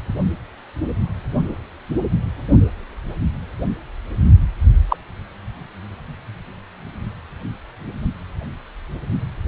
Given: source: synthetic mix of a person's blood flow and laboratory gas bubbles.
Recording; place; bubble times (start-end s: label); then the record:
Doppler ultrasound of blood flow; precordium
4.88-4.96 s: bubbles
From the record:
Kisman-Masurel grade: 113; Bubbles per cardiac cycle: 1 to 2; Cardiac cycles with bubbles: 1 to 10%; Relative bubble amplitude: loud (0.450 to 0.775); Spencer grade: 1 (occasional bubble signal discernible with the cardiac motion signal, with majority of cardiac periods free of bubbles); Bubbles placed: only in the low amplitude regions of the cardiac cycle